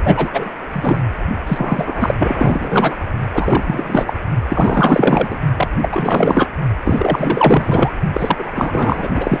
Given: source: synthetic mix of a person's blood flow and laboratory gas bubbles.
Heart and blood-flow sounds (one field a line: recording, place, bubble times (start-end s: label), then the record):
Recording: Doppler ultrasound of blood flow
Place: precordium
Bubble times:
0.04-0.49 s: bubbles
0.72-1.00 s: bubbles
1.46-2.15 s: bubbles
2.19-2.95 s: bubbles
3.33-4.15 s: bubbles
4.49-5.39 s: bubbles
5.56-5.68 s: bubbles
5.81-6.50 s: bubbles
6.84-7.92 s: bubbles
8.13-8.51 s: bubbles
8.55-9.40 s: bubbles
From the record:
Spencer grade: 4 (maximum detectable bubble signal sounding continuously throughout systole and diastole of every cardiac period, and overriding the amplitude of the normal cardiac signals)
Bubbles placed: only in the low amplitude regions of the cardiac cycle